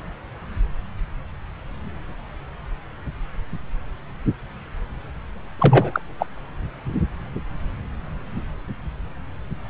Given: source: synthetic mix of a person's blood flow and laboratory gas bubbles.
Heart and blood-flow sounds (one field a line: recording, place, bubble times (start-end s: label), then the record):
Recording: Doppler ultrasound of blood flow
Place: subclavian vein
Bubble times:
5.59-6.01 s: bubbles
6.19-6.26 s: bubbles
From the record:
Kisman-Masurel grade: 222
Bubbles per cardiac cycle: several, 3 to 8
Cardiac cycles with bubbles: 10 to 50%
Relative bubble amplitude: moderate (0.250 to 0.450)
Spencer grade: 2 (many but less than half of the cardiac periods contain bubble signals, singularly or in groups)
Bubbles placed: anywhere in the cardiac cycle